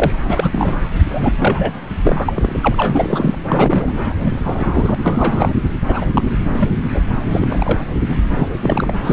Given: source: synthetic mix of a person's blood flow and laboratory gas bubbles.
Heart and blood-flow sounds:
Doppler ultrasound of blood flow; subclavian vein
0.00-0.11 s: bubbles
0.27-0.81 s: bubbles
1.07-1.33 s: bubbles
1.40-1.72 s: bubbles
2.03-3.38 s: bubbles
3.49-3.94 s: bubbles
4.20-4.32 s: bubbles
4.43-4.95 s: bubbles
5.02-5.54 s: bubbles
5.89-6.06 s: bubbles
6.14-6.22 s: bubbles
6.54-6.69 s: bubbles
6.94-7.01 s: bubbles
7.32-7.81 s: bubbles
8.10-8.18 s: bubbles
8.32-8.49 s: bubbles
8.62-8.93 s: bubbles
9.04-9.13 s: bubbles
From the record:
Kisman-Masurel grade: 243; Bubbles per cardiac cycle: several, 3 to 8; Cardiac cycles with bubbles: 100%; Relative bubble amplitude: loud (0.450 to 0.775); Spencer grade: 3 (all of the cardiac periods contain showers or single bubble signals, but not dominating or overriding the cardiac motion signals); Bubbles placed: anywhere in the cardiac cycle

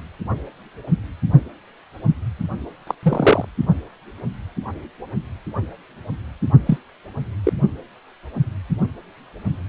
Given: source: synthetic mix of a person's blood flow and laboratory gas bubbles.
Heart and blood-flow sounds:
Doppler ultrasound of blood flow; precordium
2.87-2.95 s: bubbles
3.03-3.45 s: bubbles
6.66-6.78 s: bubbles
7.43-7.53 s: bubbles
From the record:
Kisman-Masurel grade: 123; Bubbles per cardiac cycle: 1 to 2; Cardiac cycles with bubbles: 10 to 50%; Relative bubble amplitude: loud (0.450 to 0.775); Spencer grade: 2 (many but less than half of the cardiac periods contain bubble signals, singularly or in groups); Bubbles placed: only in the low amplitude regions of the cardiac cycle

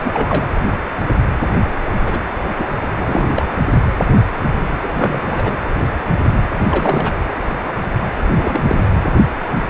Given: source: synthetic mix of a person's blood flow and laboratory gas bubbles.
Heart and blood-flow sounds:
Doppler ultrasound of blood flow; precordium
0.03-0.47 s: bubbles
2.06-2.18 s: bubbles
2.58-2.66 s: bubbles
2.98-3.50 s: bubbles
4.82-5.56 s: bubbles
6.69-7.12 s: bubbles
8.30-8.63 s: bubbles
8.68-8.83 s: bubbles
9.55-9.64 s: bubbles
From the record:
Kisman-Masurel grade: 232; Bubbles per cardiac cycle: several, 3 to 8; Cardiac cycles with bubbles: 50 to 99%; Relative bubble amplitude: moderate (0.250 to 0.450); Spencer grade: 3 (all of the cardiac periods contain showers or single bubble signals, but not dominating or overriding the cardiac motion signals); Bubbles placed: anywhere in the cardiac cycle

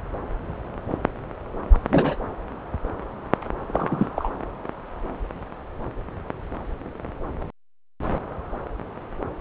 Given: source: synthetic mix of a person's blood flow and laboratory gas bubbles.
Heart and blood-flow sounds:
Doppler ultrasound of blood flow; subclavian vein
1.73-1.78 s: bubbles
1.90-2.16 s: bubbles
3.68-4.31 s: bubbles
From the record:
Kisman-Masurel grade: 212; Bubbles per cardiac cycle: several, 3 to 8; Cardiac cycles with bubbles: 1 to 10%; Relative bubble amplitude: moderate (0.250 to 0.450); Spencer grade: 1 (occasional bubble signal discernible with the cardiac motion signal, with majority of cardiac periods free of bubbles); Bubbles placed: anywhere in the cardiac cycle

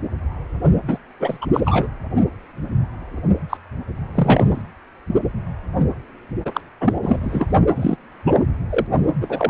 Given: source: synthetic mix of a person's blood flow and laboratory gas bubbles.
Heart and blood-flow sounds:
Doppler ultrasound of blood flow; precordium
0.88-0.98 s: bubbles
1.19-1.38 s: bubbles
1.41-1.46 s: bubbles
1.53-1.60 s: bubbles
1.65-1.88 s: bubbles
3.50-3.57 s: bubbles
4.15-4.62 s: bubbles
6.45-6.61 s: bubbles
6.81-6.94 s: bubbles
7.02-7.46 s: bubbles
7.75-7.97 s: bubbles
8.26-8.37 s: bubbles
8.70-8.87 s: bubbles
9.21-9.50 s: bubbles
From the record:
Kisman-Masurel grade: 233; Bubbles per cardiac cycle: several, 3 to 8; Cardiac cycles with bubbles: 50 to 99%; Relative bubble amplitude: loud (0.450 to 0.775); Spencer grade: 3 (all of the cardiac periods contain showers or single bubble signals, but not dominating or overriding the cardiac motion signals); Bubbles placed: only in the low amplitude regions of the cardiac cycle

